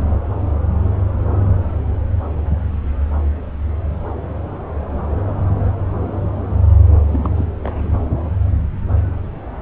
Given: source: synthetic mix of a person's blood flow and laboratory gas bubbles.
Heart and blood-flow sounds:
Doppler ultrasound of blood flow; subclavian vein
7.11-7.30 s: bubbles
7.35-7.46 s: bubbles
7.64-7.82 s: bubbles
From the record:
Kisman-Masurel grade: 211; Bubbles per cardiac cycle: several, 3 to 8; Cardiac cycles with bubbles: 1 to 10%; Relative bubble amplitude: barely perceptible (0.100 to 0.250); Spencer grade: 1 (occasional bubble signal discernible with the cardiac motion signal, with majority of cardiac periods free of bubbles); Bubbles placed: anywhere in the cardiac cycle

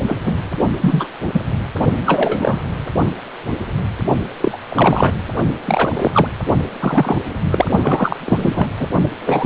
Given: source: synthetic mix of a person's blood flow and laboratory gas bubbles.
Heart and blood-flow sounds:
Doppler ultrasound of blood flow; precordium
0.07-0.16 s: bubbles
0.26-0.34 s: bubbles
0.80-1.08 s: bubbles
1.33-1.40 s: bubbles
2.05-2.60 s: bubbles
4.41-4.58 s: bubbles
4.69-5.12 s: bubbles
5.66-6.28 s: bubbles
6.79-7.19 s: bubbles
7.51-7.67 s: bubbles
7.82-8.17 s: bubbles
8.25-8.67 s: bubbles
8.79-8.88 s: bubbles
9.26-9.46 s: bubbles
From the record:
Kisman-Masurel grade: 243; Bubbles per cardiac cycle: several, 3 to 8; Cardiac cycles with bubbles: 100%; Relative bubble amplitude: loud (0.450 to 0.775); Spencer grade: 3 (all of the cardiac periods contain showers or single bubble signals, but not dominating or overriding the cardiac motion signals); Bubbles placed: only in the low amplitude regions of the cardiac cycle

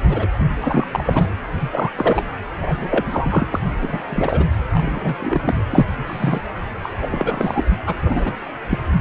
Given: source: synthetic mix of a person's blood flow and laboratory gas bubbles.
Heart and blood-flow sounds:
Doppler ultrasound of blood flow; precordium
0.07-0.27 s: bubbles
0.62-0.88 s: bubbles
0.91-1.26 s: bubbles
1.60-1.91 s: bubbles
1.95-2.24 s: bubbles
2.55-3.46 s: bubbles
3.51-3.59 s: bubbles
3.82-4.02 s: bubbles
4.10-4.46 s: bubbles
4.73-5.16 s: bubbles
5.20-5.54 s: bubbles
5.70-5.87 s: bubbles
6.06-6.41 s: bubbles
6.83-7.64 s: bubbles
7.87-7.95 s: bubbles
8.05-8.34 s: bubbles
8.69-8.79 s: bubbles
From the record:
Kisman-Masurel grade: 242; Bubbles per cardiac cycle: several, 3 to 8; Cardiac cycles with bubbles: 100%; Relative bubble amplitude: moderate (0.250 to 0.450); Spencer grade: 3 (all of the cardiac periods contain showers or single bubble signals, but not dominating or overriding the cardiac motion signals); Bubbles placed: anywhere in the cardiac cycle

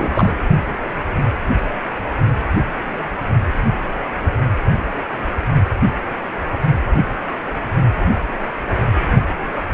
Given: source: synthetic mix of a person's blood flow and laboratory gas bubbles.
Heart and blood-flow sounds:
Doppler ultrasound of blood flow; precordium
0.00-0.33 s: bubbles
From the record:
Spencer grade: 2 (many but less than half of the cardiac periods contain bubble signals, singularly or in groups); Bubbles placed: only in the low amplitude regions of the cardiac cycle

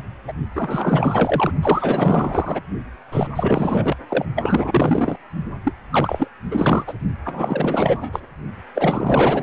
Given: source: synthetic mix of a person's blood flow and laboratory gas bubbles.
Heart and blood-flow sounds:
Doppler ultrasound of blood flow; precordium
0.28-0.33 s: bubbles
0.55-1.53 s: bubbles
1.61-2.61 s: bubbles
3.11-3.28 s: bubbles
3.35-3.97 s: bubbles
4.09-4.26 s: bubbles
4.36-5.16 s: bubbles
5.64-5.73 s: bubbles
5.90-6.29 s: bubbles
6.51-6.84 s: bubbles
6.87-6.94 s: bubbles
7.24-8.20 s: bubbles
8.75-9.43 s: bubbles
From the record:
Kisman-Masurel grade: 444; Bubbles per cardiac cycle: continuous sound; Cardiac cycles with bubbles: 100%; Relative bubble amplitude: maximal (0.775 to 0.999); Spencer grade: 4 (maximum detectable bubble signal sounding continuously throughout systole and diastole of every cardiac period, and overriding the amplitude of the normal cardiac signals); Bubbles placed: only in the low amplitude regions of the cardiac cycle

